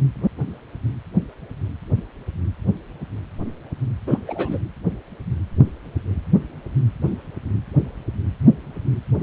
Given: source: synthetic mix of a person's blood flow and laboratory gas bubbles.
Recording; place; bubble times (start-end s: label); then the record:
Doppler ultrasound of blood flow; precordium
4.07-4.19 s: bubbles
4.28-4.58 s: bubbles
From the record:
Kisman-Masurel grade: 212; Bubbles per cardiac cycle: several, 3 to 8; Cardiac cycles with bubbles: 1 to 10%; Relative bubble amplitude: moderate (0.250 to 0.450); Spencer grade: 1 (occasional bubble signal discernible with the cardiac motion signal, with majority of cardiac periods free of bubbles); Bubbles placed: anywhere in the cardiac cycle